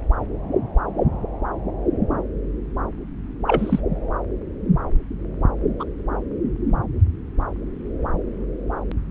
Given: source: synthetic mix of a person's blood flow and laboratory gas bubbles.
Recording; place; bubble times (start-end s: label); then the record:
Doppler ultrasound of blood flow; subclavian vein
3.47-3.80 s: bubbles
5.79-5.84 s: bubbles
From the record:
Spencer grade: 2 (many but less than half of the cardiac periods contain bubble signals, singularly or in groups); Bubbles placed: anywhere in the cardiac cycle